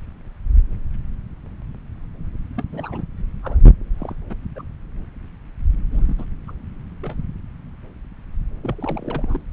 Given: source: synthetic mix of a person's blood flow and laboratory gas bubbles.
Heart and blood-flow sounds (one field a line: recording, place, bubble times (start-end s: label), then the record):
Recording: Doppler ultrasound of blood flow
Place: subclavian vein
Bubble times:
2.56-2.64 s: bubbles
2.72-3.04 s: bubbles
3.43-3.60 s: bubbles
3.64-3.71 s: bubbles
3.99-4.14 s: bubbles
4.29-4.35 s: bubbles
4.55-4.63 s: bubbles
5.92-6.25 s: bubbles
6.48-6.51 s: bubbles
7.00-7.16 s: bubbles
8.62-9.41 s: bubbles
From the record:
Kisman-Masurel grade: 221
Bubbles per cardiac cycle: several, 3 to 8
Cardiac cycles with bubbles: 10 to 50%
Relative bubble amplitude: barely perceptible (0.100 to 0.250)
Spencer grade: 2 (many but less than half of the cardiac periods contain bubble signals, singularly or in groups)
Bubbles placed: anywhere in the cardiac cycle